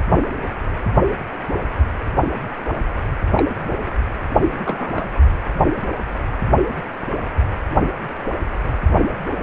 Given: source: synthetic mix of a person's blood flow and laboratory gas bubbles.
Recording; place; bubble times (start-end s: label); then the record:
Doppler ultrasound of blood flow; precordium
3.37-3.44 s: bubbles
4.65-5.08 s: bubbles
From the record:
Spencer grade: 2 (many but less than half of the cardiac periods contain bubble signals, singularly or in groups); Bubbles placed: anywhere in the cardiac cycle